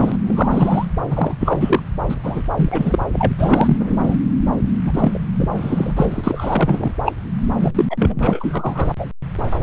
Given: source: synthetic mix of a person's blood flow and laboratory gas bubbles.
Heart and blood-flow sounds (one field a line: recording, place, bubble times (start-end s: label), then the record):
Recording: Doppler ultrasound of blood flow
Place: subclavian vein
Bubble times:
0.00-0.17 s: bubbles
0.27-0.85 s: bubbles
1.10-1.34 s: bubbles
1.40-1.83 s: bubbles
2.09-2.15 s: bubbles
2.23-2.42 s: bubbles
2.55-2.99 s: bubbles
3.13-3.33 s: bubbles
3.38-3.77 s: bubbles
3.79-4.20 s: bubbles
4.84-5.21 s: bubbles
5.36-5.49 s: bubbles
5.55-5.94 s: bubbles
5.96-6.21 s: bubbles
6.23-6.92 s: bubbles
7.05-7.12 s: bubbles
7.57-7.85 s: bubbles
7.90-8.89 s: bubbles
8.98-9.07 s: bubbles
From the record:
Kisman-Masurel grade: 343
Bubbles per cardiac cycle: rolling drumbeat, 9 or more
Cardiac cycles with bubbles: 100%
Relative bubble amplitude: loud (0.450 to 0.775)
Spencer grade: 3 (all of the cardiac periods contain showers or single bubble signals, but not dominating or overriding the cardiac motion signals)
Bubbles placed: anywhere in the cardiac cycle